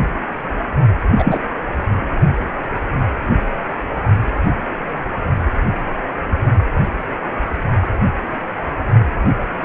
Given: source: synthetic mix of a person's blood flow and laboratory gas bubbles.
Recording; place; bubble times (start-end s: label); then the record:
Doppler ultrasound of blood flow; precordium
1.18-1.40 s: bubbles
From the record:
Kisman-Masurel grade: 213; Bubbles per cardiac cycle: several, 3 to 8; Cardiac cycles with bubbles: 1 to 10%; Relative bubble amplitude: loud (0.450 to 0.775); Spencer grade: 1 (occasional bubble signal discernible with the cardiac motion signal, with majority of cardiac periods free of bubbles); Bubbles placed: only in the low amplitude regions of the cardiac cycle